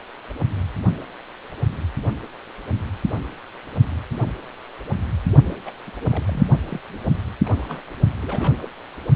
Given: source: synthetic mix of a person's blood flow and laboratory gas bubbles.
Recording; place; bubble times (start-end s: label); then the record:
Doppler ultrasound of blood flow; precordium
5.45-5.56 s: bubbles
5.65-5.71 s: bubbles
5.87-5.91 s: bubbles
6.11-6.24 s: bubbles
6.27-6.47 s: bubbles
6.64-6.80 s: bubbles
7.04-7.12 s: bubbles
7.46-7.81 s: bubbles
8.22-8.69 s: bubbles
From the record:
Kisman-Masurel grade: 221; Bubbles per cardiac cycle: several, 3 to 8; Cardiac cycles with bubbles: 10 to 50%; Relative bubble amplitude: barely perceptible (0.100 to 0.250); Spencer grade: 2 (many but less than half of the cardiac periods contain bubble signals, singularly or in groups); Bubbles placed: only in the low amplitude regions of the cardiac cycle